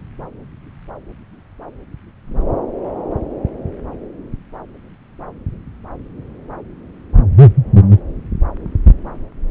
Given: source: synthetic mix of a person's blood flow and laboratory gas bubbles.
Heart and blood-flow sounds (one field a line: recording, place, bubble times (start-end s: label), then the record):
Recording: Doppler ultrasound of blood flow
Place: subclavian vein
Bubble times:
no bubbles
From the record:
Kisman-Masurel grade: 000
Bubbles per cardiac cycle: 0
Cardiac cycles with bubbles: 0%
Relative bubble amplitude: no bubbles discernible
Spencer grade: 0 (complete lack of bubble signals)